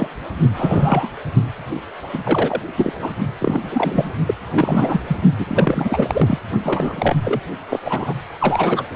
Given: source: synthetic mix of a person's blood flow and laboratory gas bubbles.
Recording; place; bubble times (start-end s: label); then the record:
Doppler ultrasound of blood flow; precordium
0.00-0.08 s: bubbles
0.53-1.08 s: bubbles
2.13-2.18 s: bubbles
2.24-2.62 s: bubbles
2.77-2.92 s: bubbles
3.00-3.12 s: bubbles
3.39-4.12 s: bubbles
4.27-4.34 s: bubbles
4.53-5.01 s: bubbles
5.07-5.17 s: bubbles
5.38-5.46 s: bubbles
5.49-6.39 s: bubbles
6.64-7.16 s: bubbles
7.23-7.40 s: bubbles
7.69-7.80 s: bubbles
7.84-8.14 s: bubbles
8.40-8.83 s: bubbles
From the record:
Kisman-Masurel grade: 342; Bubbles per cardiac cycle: rolling drumbeat, 9 or more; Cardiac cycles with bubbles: 100%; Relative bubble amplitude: moderate (0.250 to 0.450); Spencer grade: 3 (all of the cardiac periods contain showers or single bubble signals, but not dominating or overriding the cardiac motion signals); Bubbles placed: only in the low amplitude regions of the cardiac cycle